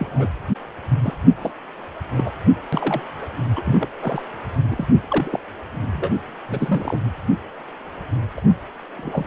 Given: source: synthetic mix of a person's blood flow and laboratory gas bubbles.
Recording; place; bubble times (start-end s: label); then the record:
Doppler ultrasound of blood flow; precordium
0.00-0.28 s: bubbles
1.02-1.14 s: bubbles
1.42-1.51 s: bubbles
2.16-2.31 s: bubbles
2.73-3.01 s: bubbles
3.21-3.26 s: bubbles
3.56-3.87 s: bubbles
4.01-4.23 s: bubbles
4.71-4.87 s: bubbles
5.10-5.39 s: bubbles
5.93-6.09 s: bubbles
6.48-7.00 s: bubbles
8.37-8.41 s: bubbles
8.97-9.26 s: bubbles
From the record:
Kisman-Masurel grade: 242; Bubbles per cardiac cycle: several, 3 to 8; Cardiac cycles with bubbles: 100%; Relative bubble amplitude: moderate (0.250 to 0.450); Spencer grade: 3 (all of the cardiac periods contain showers or single bubble signals, but not dominating or overriding the cardiac motion signals); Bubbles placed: anywhere in the cardiac cycle